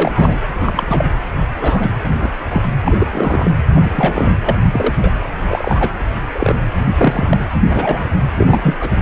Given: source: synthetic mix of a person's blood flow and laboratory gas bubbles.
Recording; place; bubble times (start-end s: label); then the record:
Doppler ultrasound of blood flow; precordium
0.00-0.37 s: bubbles
0.60-1.05 s: bubbles
1.60-1.88 s: bubbles
2.20-2.29 s: bubbles
2.50-2.62 s: bubbles
2.84-2.96 s: bubbles
2.99-3.07 s: bubbles
3.12-3.51 s: bubbles
3.75-4.35 s: bubbles
4.46-4.55 s: bubbles
4.71-4.94 s: bubbles
5.02-5.11 s: bubbles
5.47-5.89 s: bubbles
6.34-6.55 s: bubbles
6.83-7.38 s: bubbles
7.63-8.05 s: bubbles
8.38-8.90 s: bubbles
From the record:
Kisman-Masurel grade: 243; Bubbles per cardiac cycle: several, 3 to 8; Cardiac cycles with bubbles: 100%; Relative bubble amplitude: loud (0.450 to 0.775); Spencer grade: 3 (all of the cardiac periods contain showers or single bubble signals, but not dominating or overriding the cardiac motion signals); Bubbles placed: anywhere in the cardiac cycle